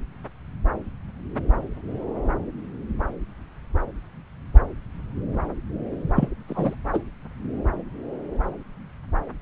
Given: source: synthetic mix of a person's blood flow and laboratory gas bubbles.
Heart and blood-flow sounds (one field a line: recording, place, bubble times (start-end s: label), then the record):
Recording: Doppler ultrasound of blood flow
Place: subclavian vein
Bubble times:
6.16-6.28 s: bubbles
6.49-6.75 s: bubbles
6.92-7.00 s: bubbles
From the record:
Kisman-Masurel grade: 123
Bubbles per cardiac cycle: 1 to 2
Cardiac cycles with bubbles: 10 to 50%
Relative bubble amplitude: loud (0.450 to 0.775)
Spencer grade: 2 (many but less than half of the cardiac periods contain bubble signals, singularly or in groups)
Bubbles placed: anywhere in the cardiac cycle